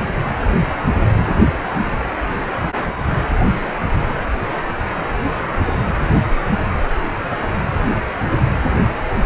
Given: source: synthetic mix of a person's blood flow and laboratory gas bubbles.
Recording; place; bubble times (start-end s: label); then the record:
Doppler ultrasound of blood flow; precordium
no bubbles
From the record:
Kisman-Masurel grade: 000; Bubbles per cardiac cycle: 0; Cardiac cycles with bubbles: 0%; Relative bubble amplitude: no bubbles discernible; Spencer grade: 0 (complete lack of bubble signals)